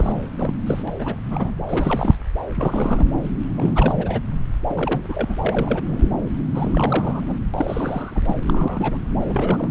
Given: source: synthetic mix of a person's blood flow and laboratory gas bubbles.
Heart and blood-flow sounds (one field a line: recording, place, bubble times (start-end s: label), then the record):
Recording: Doppler ultrasound of blood flow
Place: subclavian vein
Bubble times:
0.00-0.30 s: bubbles
0.38-0.56 s: bubbles
0.67-0.82 s: bubbles
0.88-0.91 s: bubbles
0.98-1.16 s: bubbles
1.30-1.51 s: bubbles
1.69-2.15 s: bubbles
2.54-3.12 s: bubbles
3.55-4.20 s: bubbles
4.70-5.37 s: bubbles
5.42-6.13 s: bubbles
6.54-7.36 s: bubbles
7.54-8.38 s: bubbles
8.46-8.97 s: bubbles
9.20-9.69 s: bubbles
From the record:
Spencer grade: 3 (all of the cardiac periods contain showers or single bubble signals, but not dominating or overriding the cardiac motion signals)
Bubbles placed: anywhere in the cardiac cycle